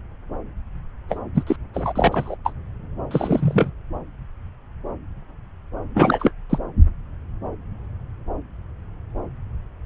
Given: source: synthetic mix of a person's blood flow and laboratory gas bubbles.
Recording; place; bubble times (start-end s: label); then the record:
Doppler ultrasound of blood flow; subclavian vein
1.08-1.18 s: bubbles
1.34-1.43 s: bubbles
1.47-1.56 s: bubbles
1.74-2.35 s: bubbles
2.45-2.53 s: bubbles
3.10-3.71 s: bubbles
5.94-6.31 s: bubbles
6.50-6.58 s: bubbles
From the record:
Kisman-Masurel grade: 232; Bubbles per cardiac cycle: several, 3 to 8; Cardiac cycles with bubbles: 50 to 99%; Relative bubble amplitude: moderate (0.250 to 0.450); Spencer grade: 3 (all of the cardiac periods contain showers or single bubble signals, but not dominating or overriding the cardiac motion signals); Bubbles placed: anywhere in the cardiac cycle